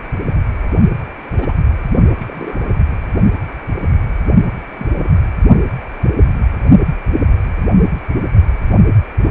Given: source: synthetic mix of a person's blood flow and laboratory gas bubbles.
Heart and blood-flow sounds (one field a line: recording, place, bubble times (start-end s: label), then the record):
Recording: Doppler ultrasound of blood flow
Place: precordium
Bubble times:
1.33-1.52 s: bubbles
2.19-2.62 s: bubbles
4.79-4.86 s: bubbles
4.94-5.08 s: bubbles
6.03-6.13 s: bubbles
From the record:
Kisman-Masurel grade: 121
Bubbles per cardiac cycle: 1 to 2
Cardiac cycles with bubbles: 10 to 50%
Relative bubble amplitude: barely perceptible (0.100 to 0.250)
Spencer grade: 2 (many but less than half of the cardiac periods contain bubble signals, singularly or in groups)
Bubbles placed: only in the low amplitude regions of the cardiac cycle